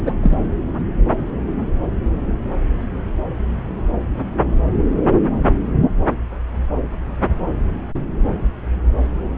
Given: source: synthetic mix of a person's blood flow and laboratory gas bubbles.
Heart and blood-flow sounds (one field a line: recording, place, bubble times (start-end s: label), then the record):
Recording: Doppler ultrasound of blood flow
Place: subclavian vein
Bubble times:
0.06-0.14 s: bubbles
0.21-0.37 s: bubbles
From the record:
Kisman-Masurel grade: 113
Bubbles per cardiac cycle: 1 to 2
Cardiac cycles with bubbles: 1 to 10%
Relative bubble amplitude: loud (0.450 to 0.775)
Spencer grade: 1 (occasional bubble signal discernible with the cardiac motion signal, with majority of cardiac periods free of bubbles)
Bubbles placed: anywhere in the cardiac cycle